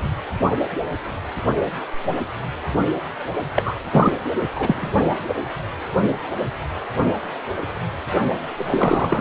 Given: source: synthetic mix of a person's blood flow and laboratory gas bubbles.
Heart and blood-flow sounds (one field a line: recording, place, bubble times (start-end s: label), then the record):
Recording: Doppler ultrasound of blood flow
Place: precordium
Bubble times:
3.55-3.73 s: bubbles
3.91-4.12 s: bubbles
4.55-4.91 s: bubbles
8.56-9.21 s: bubbles
From the record:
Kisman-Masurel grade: 223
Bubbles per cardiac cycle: several, 3 to 8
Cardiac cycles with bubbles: 10 to 50%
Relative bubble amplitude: loud (0.450 to 0.775)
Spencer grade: 2 (many but less than half of the cardiac periods contain bubble signals, singularly or in groups)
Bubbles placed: only in the low amplitude regions of the cardiac cycle